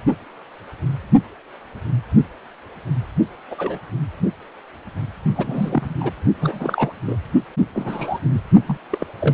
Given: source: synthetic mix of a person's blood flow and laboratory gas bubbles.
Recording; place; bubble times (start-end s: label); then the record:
Doppler ultrasound of blood flow; precordium
3.50-3.79 s: bubbles
5.35-5.94 s: bubbles
6.00-6.12 s: bubbles
6.40-6.93 s: bubbles
7.06-7.17 s: bubbles
7.74-8.19 s: bubbles
8.66-8.77 s: bubbles
8.90-9.06 s: bubbles
9.20-9.34 s: bubbles
From the record:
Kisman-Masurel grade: 232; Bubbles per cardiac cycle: several, 3 to 8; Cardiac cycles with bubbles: 50 to 99%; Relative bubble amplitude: moderate (0.250 to 0.450); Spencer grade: 3 (all of the cardiac periods contain showers or single bubble signals, but not dominating or overriding the cardiac motion signals); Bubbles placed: only in the low amplitude regions of the cardiac cycle